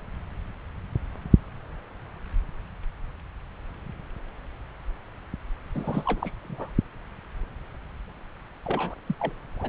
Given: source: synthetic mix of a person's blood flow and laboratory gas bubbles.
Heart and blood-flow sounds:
Doppler ultrasound of blood flow; subclavian vein
5.74-6.31 s: bubbles
6.43-6.72 s: bubbles
8.64-8.95 s: bubbles
9.06-9.16 s: bubbles
9.19-9.33 s: bubbles
9.57-9.69 s: bubbles
From the record:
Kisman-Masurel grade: 222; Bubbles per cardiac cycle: several, 3 to 8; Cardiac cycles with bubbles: 10 to 50%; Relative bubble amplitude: moderate (0.250 to 0.450); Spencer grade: 2 (many but less than half of the cardiac periods contain bubble signals, singularly or in groups); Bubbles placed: anywhere in the cardiac cycle

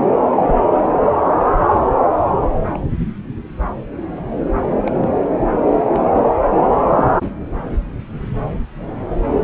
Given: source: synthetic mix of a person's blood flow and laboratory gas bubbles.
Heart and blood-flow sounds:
Doppler ultrasound of blood flow; subclavian vein
0.43-0.55 s: bubbles
2.73-2.79 s: bubbles
4.85-5.10 s: bubbles
5.67-5.72 s: bubbles
5.88-6.32 s: bubbles
6.73-7.21 s: bubbles
9.36-9.44 s: bubbles
From the record:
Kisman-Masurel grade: 121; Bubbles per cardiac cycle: 1 to 2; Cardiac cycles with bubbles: 10 to 50%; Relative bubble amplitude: barely perceptible (0.100 to 0.250); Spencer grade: 2 (many but less than half of the cardiac periods contain bubble signals, singularly or in groups); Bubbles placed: anywhere in the cardiac cycle

